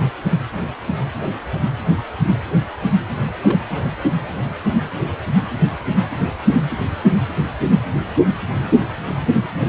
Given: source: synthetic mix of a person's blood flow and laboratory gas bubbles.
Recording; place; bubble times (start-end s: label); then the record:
Doppler ultrasound of blood flow; precordium
3.42-3.67 s: bubbles
3.71-3.91 s: bubbles
From the record:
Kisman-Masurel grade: 211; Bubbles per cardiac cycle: several, 3 to 8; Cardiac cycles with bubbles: 1 to 10%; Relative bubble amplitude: barely perceptible (0.100 to 0.250); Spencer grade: 1 (occasional bubble signal discernible with the cardiac motion signal, with majority of cardiac periods free of bubbles); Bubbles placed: anywhere in the cardiac cycle